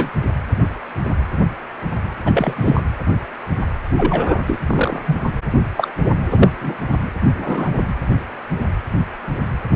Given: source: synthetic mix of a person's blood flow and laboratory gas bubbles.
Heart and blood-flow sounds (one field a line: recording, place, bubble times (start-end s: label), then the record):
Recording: Doppler ultrasound of blood flow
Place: precordium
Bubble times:
0.00-0.10 s: bubbles
2.25-2.81 s: bubbles
3.97-4.42 s: bubbles
4.47-4.59 s: bubbles
4.67-5.02 s: bubbles
5.07-5.16 s: bubbles
5.77-5.91 s: bubbles
6.30-6.49 s: bubbles
6.59-6.74 s: bubbles
7.37-7.69 s: bubbles
From the record:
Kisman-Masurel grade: 223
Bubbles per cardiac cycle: several, 3 to 8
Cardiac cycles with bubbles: 10 to 50%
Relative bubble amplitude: loud (0.450 to 0.775)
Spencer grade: 2 (many but less than half of the cardiac periods contain bubble signals, singularly or in groups)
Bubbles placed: anywhere in the cardiac cycle